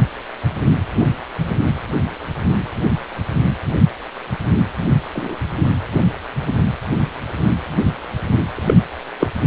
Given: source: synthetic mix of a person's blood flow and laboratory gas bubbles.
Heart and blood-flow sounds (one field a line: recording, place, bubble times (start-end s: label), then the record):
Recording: Doppler ultrasound of blood flow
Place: precordium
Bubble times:
5.13-5.35 s: bubbles
8.56-8.78 s: bubbles
9.20-9.29 s: bubbles
From the record:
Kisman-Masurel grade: 123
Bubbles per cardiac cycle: 1 to 2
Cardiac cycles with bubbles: 10 to 50%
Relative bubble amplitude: loud (0.450 to 0.775)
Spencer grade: 2 (many but less than half of the cardiac periods contain bubble signals, singularly or in groups)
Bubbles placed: anywhere in the cardiac cycle